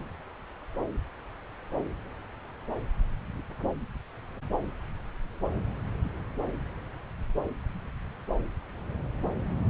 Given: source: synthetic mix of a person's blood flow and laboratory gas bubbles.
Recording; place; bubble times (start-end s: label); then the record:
Doppler ultrasound of blood flow; subclavian vein
no bubbles
From the record:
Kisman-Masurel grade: 000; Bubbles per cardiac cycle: 0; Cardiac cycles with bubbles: 0%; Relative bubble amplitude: no bubbles discernible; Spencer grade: 0 (complete lack of bubble signals)